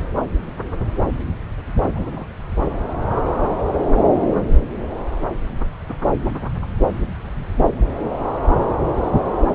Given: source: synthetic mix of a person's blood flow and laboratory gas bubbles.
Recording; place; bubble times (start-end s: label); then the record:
Doppler ultrasound of blood flow; subclavian vein
1.93-2.25 s: bubbles
From the record:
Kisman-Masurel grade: 111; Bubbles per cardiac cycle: 1 to 2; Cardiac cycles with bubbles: 1 to 10%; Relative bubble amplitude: barely perceptible (0.100 to 0.250); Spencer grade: 1 (occasional bubble signal discernible with the cardiac motion signal, with majority of cardiac periods free of bubbles); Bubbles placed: anywhere in the cardiac cycle